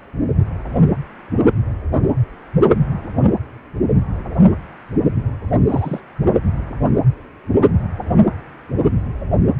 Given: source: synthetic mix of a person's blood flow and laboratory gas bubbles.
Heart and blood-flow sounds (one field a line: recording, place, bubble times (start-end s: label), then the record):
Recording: Doppler ultrasound of blood flow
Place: precordium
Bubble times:
5.67-6.01 s: bubbles
From the record:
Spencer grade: 1 (occasional bubble signal discernible with the cardiac motion signal, with majority of cardiac periods free of bubbles)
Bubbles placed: anywhere in the cardiac cycle